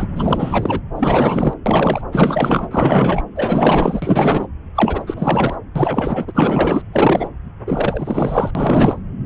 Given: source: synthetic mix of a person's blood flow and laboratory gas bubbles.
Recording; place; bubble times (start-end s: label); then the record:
Doppler ultrasound of blood flow; subclavian vein
0.00-0.08 s: bubbles
0.16-0.81 s: bubbles
0.95-1.54 s: bubbles
1.66-2.02 s: bubbles
2.11-2.68 s: bubbles
2.71-3.23 s: bubbles
3.35-4.47 s: bubbles
4.75-5.55 s: bubbles
5.75-6.82 s: bubbles
6.92-7.28 s: bubbles
7.66-8.51 s: bubbles
8.55-8.98 s: bubbles
From the record:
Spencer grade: 4 (maximum detectable bubble signal sounding continuously throughout systole and diastole of every cardiac period, and overriding the amplitude of the normal cardiac signals); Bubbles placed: anywhere in the cardiac cycle